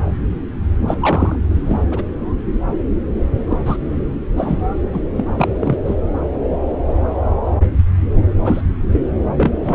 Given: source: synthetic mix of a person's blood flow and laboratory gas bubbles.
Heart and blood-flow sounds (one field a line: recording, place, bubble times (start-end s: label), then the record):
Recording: Doppler ultrasound of blood flow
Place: subclavian vein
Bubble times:
0.86-0.95 s: bubbles
1.00-1.35 s: bubbles
1.46-1.83 s: bubbles
1.91-2.04 s: bubbles
3.50-3.61 s: bubbles
3.66-3.76 s: bubbles
4.37-4.58 s: bubbles
4.91-5.06 s: bubbles
5.17-5.25 s: bubbles
5.38-5.48 s: bubbles
5.59-5.78 s: bubbles
5.85-5.94 s: bubbles
8.45-8.61 s: bubbles
8.92-9.01 s: bubbles
9.37-9.52 s: bubbles
9.64-9.75 s: bubbles
From the record:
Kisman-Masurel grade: 232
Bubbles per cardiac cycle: several, 3 to 8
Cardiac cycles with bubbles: 50 to 99%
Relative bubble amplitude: moderate (0.250 to 0.450)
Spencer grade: 3 (all of the cardiac periods contain showers or single bubble signals, but not dominating or overriding the cardiac motion signals)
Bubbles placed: anywhere in the cardiac cycle